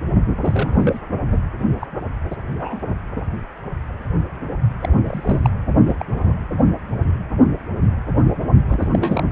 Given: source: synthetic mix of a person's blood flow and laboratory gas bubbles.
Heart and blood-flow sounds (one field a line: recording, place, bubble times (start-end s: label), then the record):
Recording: Doppler ultrasound of blood flow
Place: precordium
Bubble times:
0.26-0.36 s: bubbles
0.43-1.00 s: bubbles
1.81-1.87 s: bubbles
2.30-2.35 s: bubbles
2.57-2.80 s: bubbles
4.81-4.89 s: bubbles
5.06-5.50 s: bubbles
5.85-5.96 s: bubbles
5.99-6.35 s: bubbles
8.69-8.88 s: bubbles
8.91-9.24 s: bubbles
From the record:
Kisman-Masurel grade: 232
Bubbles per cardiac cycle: several, 3 to 8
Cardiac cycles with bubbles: 50 to 99%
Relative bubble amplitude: moderate (0.250 to 0.450)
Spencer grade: 3 (all of the cardiac periods contain showers or single bubble signals, but not dominating or overriding the cardiac motion signals)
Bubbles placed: only in the low amplitude regions of the cardiac cycle